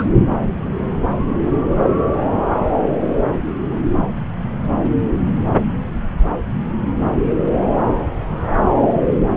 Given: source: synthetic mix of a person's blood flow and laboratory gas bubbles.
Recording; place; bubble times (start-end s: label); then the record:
Doppler ultrasound of blood flow; subclavian vein
0.00-0.04 s: bubbles
From the record:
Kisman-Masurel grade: 213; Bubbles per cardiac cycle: several, 3 to 8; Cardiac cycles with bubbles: 1 to 10%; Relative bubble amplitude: loud (0.450 to 0.775); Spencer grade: 1 (occasional bubble signal discernible with the cardiac motion signal, with majority of cardiac periods free of bubbles); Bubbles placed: anywhere in the cardiac cycle